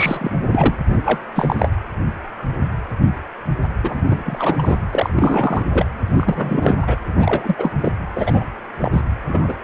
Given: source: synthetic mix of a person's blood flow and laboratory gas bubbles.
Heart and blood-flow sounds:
Doppler ultrasound of blood flow; precordium
0.00-0.30 s: bubbles
0.52-0.75 s: bubbles
0.86-1.20 s: bubbles
1.35-1.55 s: bubbles
1.58-1.69 s: bubbles
3.83-4.77 s: bubbles
4.90-5.85 s: bubbles
6.13-6.75 s: bubbles
6.82-6.96 s: bubbles
7.17-7.71 s: bubbles
7.79-7.93 s: bubbles
8.15-8.45 s: bubbles
8.79-9.02 s: bubbles
9.27-9.54 s: bubbles
From the record:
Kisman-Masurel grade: 333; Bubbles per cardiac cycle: rolling drumbeat, 9 or more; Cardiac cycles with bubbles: 50 to 99%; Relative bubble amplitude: loud (0.450 to 0.775); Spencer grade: 3 (all of the cardiac periods contain showers or single bubble signals, but not dominating or overriding the cardiac motion signals); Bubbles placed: anywhere in the cardiac cycle

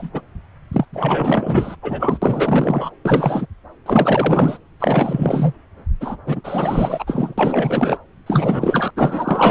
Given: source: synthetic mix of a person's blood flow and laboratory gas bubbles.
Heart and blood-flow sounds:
Doppler ultrasound of blood flow; subclavian vein
0.00-0.22 s: bubbles
0.72-0.85 s: bubbles
0.92-1.76 s: bubbles
1.82-2.18 s: bubbles
2.21-2.90 s: bubbles
3.05-3.46 s: bubbles
3.86-4.58 s: bubbles
4.79-5.53 s: bubbles
6.00-6.17 s: bubbles
6.25-7.35 s: bubbles
7.38-7.98 s: bubbles
8.26-8.91 s: bubbles
8.96-9.51 s: bubbles
From the record:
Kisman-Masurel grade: 444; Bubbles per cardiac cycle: continuous sound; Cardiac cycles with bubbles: 100%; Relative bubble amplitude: maximal (0.775 to 0.999); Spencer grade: 4 (maximum detectable bubble signal sounding continuously throughout systole and diastole of every cardiac period, and overriding the amplitude of the normal cardiac signals); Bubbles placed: anywhere in the cardiac cycle

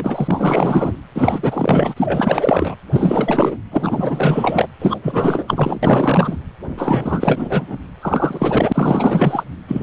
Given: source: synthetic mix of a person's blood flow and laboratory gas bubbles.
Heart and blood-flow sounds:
Doppler ultrasound of blood flow; precordium
0.00-0.92 s: bubbles
1.15-2.75 s: bubbles
2.92-3.57 s: bubbles
3.71-4.68 s: bubbles
4.80-5.00 s: bubbles
5.02-5.79 s: bubbles
5.83-6.37 s: bubbles
6.75-7.77 s: bubbles
8.02-9.44 s: bubbles
9.68-9.82 s: bubbles
From the record:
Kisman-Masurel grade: 444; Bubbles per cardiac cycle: continuous sound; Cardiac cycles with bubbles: 100%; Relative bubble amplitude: maximal (0.775 to 0.999); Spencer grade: 4 (maximum detectable bubble signal sounding continuously throughout systole and diastole of every cardiac period, and overriding the amplitude of the normal cardiac signals); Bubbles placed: anywhere in the cardiac cycle

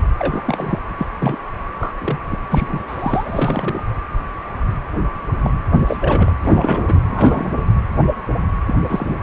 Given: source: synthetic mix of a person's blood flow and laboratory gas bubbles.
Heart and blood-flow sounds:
Doppler ultrasound of blood flow; precordium
0.19-0.78 s: bubbles
0.97-1.06 s: bubbles
1.20-1.36 s: bubbles
1.79-1.92 s: bubbles
2.01-2.17 s: bubbles
2.30-2.38 s: bubbles
2.50-2.80 s: bubbles
2.88-3.83 s: bubbles
5.44-5.52 s: bubbles
5.79-5.97 s: bubbles
6.01-6.32 s: bubbles
6.45-7.00 s: bubbles
7.03-7.53 s: bubbles
8.66-8.75 s: bubbles
8.83-9.14 s: bubbles
From the record:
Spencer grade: 3 (all of the cardiac periods contain showers or single bubble signals, but not dominating or overriding the cardiac motion signals); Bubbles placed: anywhere in the cardiac cycle

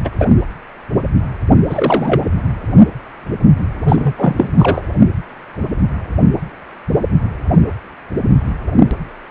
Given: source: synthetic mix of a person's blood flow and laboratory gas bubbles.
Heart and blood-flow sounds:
Doppler ultrasound of blood flow; precordium
0.04-0.09 s: bubbles
0.19-0.28 s: bubbles
1.70-2.25 s: bubbles
3.83-4.50 s: bubbles
4.57-4.82 s: bubbles
From the record:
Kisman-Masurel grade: 223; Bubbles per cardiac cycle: several, 3 to 8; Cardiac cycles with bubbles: 10 to 50%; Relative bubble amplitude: loud (0.450 to 0.775); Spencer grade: 2 (many but less than half of the cardiac periods contain bubble signals, singularly or in groups); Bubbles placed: anywhere in the cardiac cycle

